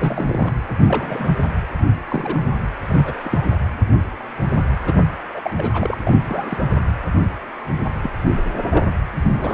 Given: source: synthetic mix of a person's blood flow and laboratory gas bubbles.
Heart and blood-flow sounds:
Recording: Doppler ultrasound of blood flow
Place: precordium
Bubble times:
0.00-0.53 s: bubbles
0.88-1.50 s: bubbles
2.06-2.49 s: bubbles
2.89-3.21 s: bubbles
3.23-3.47 s: bubbles
4.87-4.94 s: bubbles
5.33-5.54 s: bubbles
5.57-5.96 s: bubbles
6.07-6.75 s: bubbles
8.02-8.11 s: bubbles
8.37-8.42 s: bubbles
8.52-8.85 s: bubbles
9.21-9.54 s: bubbles
From the record:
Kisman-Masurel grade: 232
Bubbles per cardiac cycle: several, 3 to 8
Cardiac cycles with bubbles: 50 to 99%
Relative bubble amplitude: moderate (0.250 to 0.450)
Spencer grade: 3 (all of the cardiac periods contain showers or single bubble signals, but not dominating or overriding the cardiac motion signals)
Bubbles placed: anywhere in the cardiac cycle

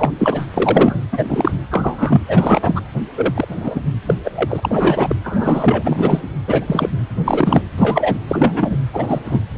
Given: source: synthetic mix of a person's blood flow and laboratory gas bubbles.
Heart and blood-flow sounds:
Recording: Doppler ultrasound of blood flow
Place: precordium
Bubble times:
0.00-0.11 s: bubbles
0.18-0.47 s: bubbles
0.54-1.06 s: bubbles
1.11-1.51 s: bubbles
1.70-2.21 s: bubbles
2.28-2.81 s: bubbles
3.17-3.80 s: bubbles
4.06-4.15 s: bubbles
4.24-4.31 s: bubbles
4.36-5.16 s: bubbles
5.24-6.22 s: bubbles
6.47-6.89 s: bubbles
7.25-7.62 s: bubbles
7.78-8.19 s: bubbles
8.28-8.77 s: bubbles
8.93-9.21 s: bubbles
9.25-9.41 s: bubbles
From the record:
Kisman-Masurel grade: 243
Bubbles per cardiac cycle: several, 3 to 8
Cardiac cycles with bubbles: 100%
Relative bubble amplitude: loud (0.450 to 0.775)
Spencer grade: 3 (all of the cardiac periods contain showers or single bubble signals, but not dominating or overriding the cardiac motion signals)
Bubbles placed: anywhere in the cardiac cycle

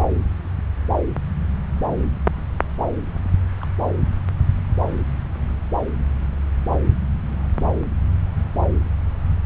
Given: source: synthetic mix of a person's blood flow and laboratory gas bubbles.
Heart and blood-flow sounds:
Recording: Doppler ultrasound of blood flow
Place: subclavian vein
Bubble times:
3.61-3.66 s: bubbles
From the record:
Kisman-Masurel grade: 111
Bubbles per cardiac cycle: 1 to 2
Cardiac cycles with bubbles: 1 to 10%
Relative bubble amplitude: barely perceptible (0.100 to 0.250)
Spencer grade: 1 (occasional bubble signal discernible with the cardiac motion signal, with majority of cardiac periods free of bubbles)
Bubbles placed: anywhere in the cardiac cycle

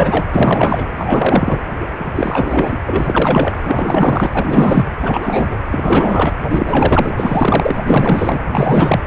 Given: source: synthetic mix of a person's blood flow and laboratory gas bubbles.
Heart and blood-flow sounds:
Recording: Doppler ultrasound of blood flow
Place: precordium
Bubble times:
0.00-0.26 s: bubbles
0.32-0.87 s: bubbles
0.98-1.60 s: bubbles
2.15-2.77 s: bubbles
2.86-3.57 s: bubbles
3.64-4.30 s: bubbles
4.33-4.85 s: bubbles
5.01-5.57 s: bubbles
5.71-6.32 s: bubbles
6.50-7.14 s: bubbles
7.17-7.81 s: bubbles
7.85-8.40 s: bubbles
8.52-9.01 s: bubbles
From the record:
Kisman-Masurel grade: 444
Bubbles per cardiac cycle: continuous sound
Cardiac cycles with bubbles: 100%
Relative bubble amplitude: maximal (0.775 to 0.999)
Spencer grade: 4 (maximum detectable bubble signal sounding continuously throughout systole and diastole of every cardiac period, and overriding the amplitude of the normal cardiac signals)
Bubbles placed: anywhere in the cardiac cycle

